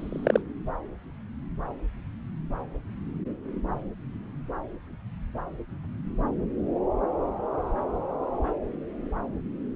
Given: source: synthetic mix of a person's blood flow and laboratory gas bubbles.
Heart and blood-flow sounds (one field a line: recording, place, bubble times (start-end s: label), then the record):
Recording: Doppler ultrasound of blood flow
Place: subclavian vein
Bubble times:
0.00-0.41 s: bubbles
From the record:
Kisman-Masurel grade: 223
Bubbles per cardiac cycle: several, 3 to 8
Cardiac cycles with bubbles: 10 to 50%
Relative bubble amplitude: loud (0.450 to 0.775)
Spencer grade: 2 (many but less than half of the cardiac periods contain bubble signals, singularly or in groups)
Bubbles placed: anywhere in the cardiac cycle